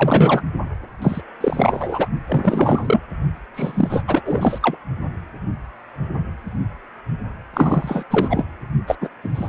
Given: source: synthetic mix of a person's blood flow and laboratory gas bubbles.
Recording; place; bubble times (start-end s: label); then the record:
Doppler ultrasound of blood flow; precordium
0.00-0.42 s: bubbles
1.02-1.22 s: bubbles
1.41-2.08 s: bubbles
2.27-3.00 s: bubbles
3.54-4.04 s: bubbles
4.07-4.21 s: bubbles
4.25-4.58 s: bubbles
4.62-4.77 s: bubbles
7.53-8.04 s: bubbles
8.10-8.46 s: bubbles
8.87-8.96 s: bubbles
9.01-9.10 s: bubbles
9.23-9.29 s: bubbles
9.35-9.49 s: bubbles
From the record:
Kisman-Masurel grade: 333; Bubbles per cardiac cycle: rolling drumbeat, 9 or more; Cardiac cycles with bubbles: 50 to 99%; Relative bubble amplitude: loud (0.450 to 0.775); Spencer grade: 3 (all of the cardiac periods contain showers or single bubble signals, but not dominating or overriding the cardiac motion signals); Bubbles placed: only in the low amplitude regions of the cardiac cycle